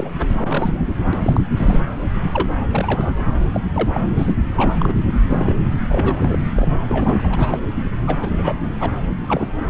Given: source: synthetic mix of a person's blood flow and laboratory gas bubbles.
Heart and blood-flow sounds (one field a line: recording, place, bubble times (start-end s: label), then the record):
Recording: Doppler ultrasound of blood flow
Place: subclavian vein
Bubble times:
0.00-0.85 s: bubbles
1.13-1.18 s: bubbles
1.23-1.41 s: bubbles
1.56-1.80 s: bubbles
2.22-2.58 s: bubbles
2.71-3.19 s: bubbles
3.54-3.60 s: bubbles
3.75-3.88 s: bubbles
3.92-4.01 s: bubbles
4.16-4.35 s: bubbles
4.52-4.74 s: bubbles
4.80-4.93 s: bubbles
5.30-5.56 s: bubbles
5.89-6.39 s: bubbles
6.56-6.80 s: bubbles
6.89-7.60 s: bubbles
8.07-8.16 s: bubbles
8.21-8.33 s: bubbles
8.37-8.61 s: bubbles
8.80-8.92 s: bubbles
9.28-9.54 s: bubbles
From the record:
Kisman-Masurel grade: 342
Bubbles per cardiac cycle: rolling drumbeat, 9 or more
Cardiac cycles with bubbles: 100%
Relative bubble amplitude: moderate (0.250 to 0.450)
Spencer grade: 3 (all of the cardiac periods contain showers or single bubble signals, but not dominating or overriding the cardiac motion signals)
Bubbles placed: anywhere in the cardiac cycle